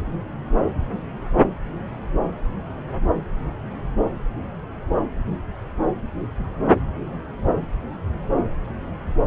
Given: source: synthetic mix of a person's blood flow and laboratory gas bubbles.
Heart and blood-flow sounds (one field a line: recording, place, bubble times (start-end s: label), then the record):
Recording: Doppler ultrasound of blood flow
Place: subclavian vein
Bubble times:
no bubbles
From the record:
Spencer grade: 0 (complete lack of bubble signals)